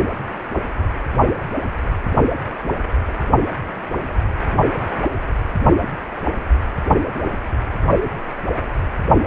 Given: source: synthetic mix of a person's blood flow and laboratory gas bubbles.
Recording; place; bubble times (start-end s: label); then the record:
Doppler ultrasound of blood flow; precordium
no bubbles
From the record:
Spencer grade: 0 (complete lack of bubble signals)